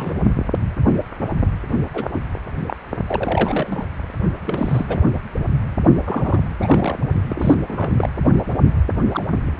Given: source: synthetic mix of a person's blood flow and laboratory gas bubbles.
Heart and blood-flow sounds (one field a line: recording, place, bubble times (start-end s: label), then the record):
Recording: Doppler ultrasound of blood flow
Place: precordium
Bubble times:
0.00-0.17 s: bubbles
1.93-2.23 s: bubbles
2.66-2.74 s: bubbles
3.07-3.88 s: bubbles
4.46-5.02 s: bubbles
6.04-6.38 s: bubbles
6.60-6.98 s: bubbles
7.28-7.54 s: bubbles
7.68-8.09 s: bubbles
9.08-9.57 s: bubbles
From the record:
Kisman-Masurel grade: 232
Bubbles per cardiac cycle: several, 3 to 8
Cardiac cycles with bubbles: 50 to 99%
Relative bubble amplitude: moderate (0.250 to 0.450)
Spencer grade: 3 (all of the cardiac periods contain showers or single bubble signals, but not dominating or overriding the cardiac motion signals)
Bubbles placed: only in the low amplitude regions of the cardiac cycle